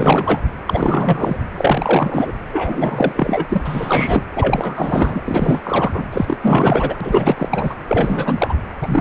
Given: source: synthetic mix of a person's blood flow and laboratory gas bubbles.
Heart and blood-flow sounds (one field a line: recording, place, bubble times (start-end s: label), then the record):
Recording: Doppler ultrasound of blood flow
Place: precordium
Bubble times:
0.00-0.42 s: bubbles
0.67-1.38 s: bubbles
1.54-2.32 s: bubbles
2.52-3.12 s: bubbles
3.15-3.61 s: bubbles
3.63-4.23 s: bubbles
4.36-5.22 s: bubbles
5.26-5.61 s: bubbles
5.63-6.05 s: bubbles
6.12-6.37 s: bubbles
6.41-7.76 s: bubbles
7.87-8.54 s: bubbles
8.81-9.01 s: bubbles
From the record:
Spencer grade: 4 (maximum detectable bubble signal sounding continuously throughout systole and diastole of every cardiac period, and overriding the amplitude of the normal cardiac signals)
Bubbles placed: anywhere in the cardiac cycle